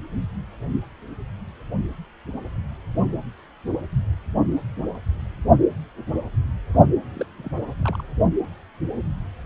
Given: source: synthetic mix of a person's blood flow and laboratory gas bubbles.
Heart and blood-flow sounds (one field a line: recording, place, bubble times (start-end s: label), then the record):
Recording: Doppler ultrasound of blood flow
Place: precordium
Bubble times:
7.15-7.25 s: bubbles
7.38-7.50 s: bubbles
7.83-8.02 s: bubbles
From the record:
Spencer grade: 2 (many but less than half of the cardiac periods contain bubble signals, singularly or in groups)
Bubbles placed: only in the low amplitude regions of the cardiac cycle